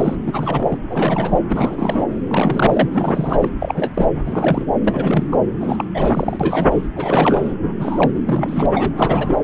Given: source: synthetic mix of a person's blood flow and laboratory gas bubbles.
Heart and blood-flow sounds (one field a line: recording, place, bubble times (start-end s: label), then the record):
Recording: Doppler ultrasound of blood flow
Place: subclavian vein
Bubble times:
0.00-0.16 s: bubbles
0.26-0.78 s: bubbles
0.89-1.38 s: bubbles
1.49-2.04 s: bubbles
2.27-2.90 s: bubbles
2.94-3.50 s: bubbles
3.60-4.21 s: bubbles
4.25-4.66 s: bubbles
4.82-5.27 s: bubbles
5.32-5.37 s: bubbles
5.61-5.84 s: bubbles
5.94-6.88 s: bubbles
6.96-7.54 s: bubbles
7.78-8.66 s: bubbles
8.73-8.94 s: bubbles
8.96-9.39 s: bubbles
From the record:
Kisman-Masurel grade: 342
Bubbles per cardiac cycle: rolling drumbeat, 9 or more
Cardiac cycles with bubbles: 100%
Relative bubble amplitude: moderate (0.250 to 0.450)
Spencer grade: 3 (all of the cardiac periods contain showers or single bubble signals, but not dominating or overriding the cardiac motion signals)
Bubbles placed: anywhere in the cardiac cycle